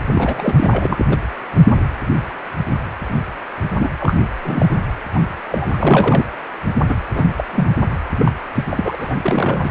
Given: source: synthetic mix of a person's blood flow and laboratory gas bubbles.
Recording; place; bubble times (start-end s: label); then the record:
Doppler ultrasound of blood flow; precordium
0.06-0.53 s: bubbles
0.56-0.69 s: bubbles
0.71-1.06 s: bubbles
1.09-1.19 s: bubbles
3.78-3.89 s: bubbles
3.99-4.15 s: bubbles
4.43-4.78 s: bubbles
5.14-5.20 s: bubbles
5.52-5.70 s: bubbles
5.73-6.25 s: bubbles
6.88-6.95 s: bubbles
7.15-7.27 s: bubbles
7.38-7.44 s: bubbles
7.52-7.70 s: bubbles
8.18-8.31 s: bubbles
8.54-8.64 s: bubbles
8.71-8.96 s: bubbles
8.98-9.16 s: bubbles
9.24-9.70 s: bubbles
From the record:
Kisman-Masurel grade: 232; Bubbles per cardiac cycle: several, 3 to 8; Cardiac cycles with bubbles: 50 to 99%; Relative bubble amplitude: moderate (0.250 to 0.450); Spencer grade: 3 (all of the cardiac periods contain showers or single bubble signals, but not dominating or overriding the cardiac motion signals); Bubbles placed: anywhere in the cardiac cycle